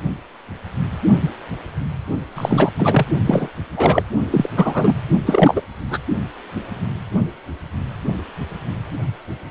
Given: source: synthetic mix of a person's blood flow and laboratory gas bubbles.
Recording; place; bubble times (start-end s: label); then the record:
Doppler ultrasound of blood flow; precordium
2.35-2.72 s: bubbles
2.76-3.06 s: bubbles
3.26-3.48 s: bubbles
3.76-4.02 s: bubbles
4.30-4.48 s: bubbles
4.56-4.93 s: bubbles
5.26-5.62 s: bubbles
5.91-5.97 s: bubbles
From the record:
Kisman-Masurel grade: 233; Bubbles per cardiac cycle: several, 3 to 8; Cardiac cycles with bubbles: 50 to 99%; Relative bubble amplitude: loud (0.450 to 0.775); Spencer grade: 3 (all of the cardiac periods contain showers or single bubble signals, but not dominating or overriding the cardiac motion signals); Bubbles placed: only in the low amplitude regions of the cardiac cycle